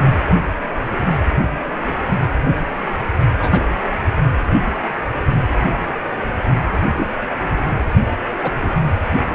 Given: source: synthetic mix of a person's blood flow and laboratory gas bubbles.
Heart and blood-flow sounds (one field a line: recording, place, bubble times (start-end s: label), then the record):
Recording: Doppler ultrasound of blood flow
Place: precordium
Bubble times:
3.37-3.68 s: bubbles
6.92-7.11 s: bubbles
8.42-8.51 s: bubbles
8.62-8.69 s: bubbles
From the record:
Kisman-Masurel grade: 122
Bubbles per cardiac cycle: 1 to 2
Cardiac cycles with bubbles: 10 to 50%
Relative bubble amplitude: moderate (0.250 to 0.450)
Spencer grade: 2 (many but less than half of the cardiac periods contain bubble signals, singularly or in groups)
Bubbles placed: anywhere in the cardiac cycle